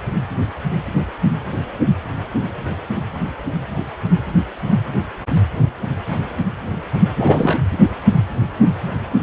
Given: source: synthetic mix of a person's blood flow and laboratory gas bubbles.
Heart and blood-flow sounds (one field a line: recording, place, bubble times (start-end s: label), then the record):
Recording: Doppler ultrasound of blood flow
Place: precordium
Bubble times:
7.16-7.59 s: bubbles
From the record:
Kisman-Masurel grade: 213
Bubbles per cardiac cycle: several, 3 to 8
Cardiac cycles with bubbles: 1 to 10%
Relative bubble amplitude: loud (0.450 to 0.775)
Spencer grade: 1 (occasional bubble signal discernible with the cardiac motion signal, with majority of cardiac periods free of bubbles)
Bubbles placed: anywhere in the cardiac cycle